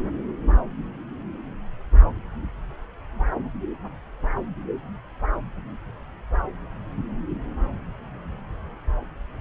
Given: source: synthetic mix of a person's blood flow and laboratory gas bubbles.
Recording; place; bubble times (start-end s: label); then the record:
Doppler ultrasound of blood flow; subclavian vein
no bubbles
From the record:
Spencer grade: 0 (complete lack of bubble signals)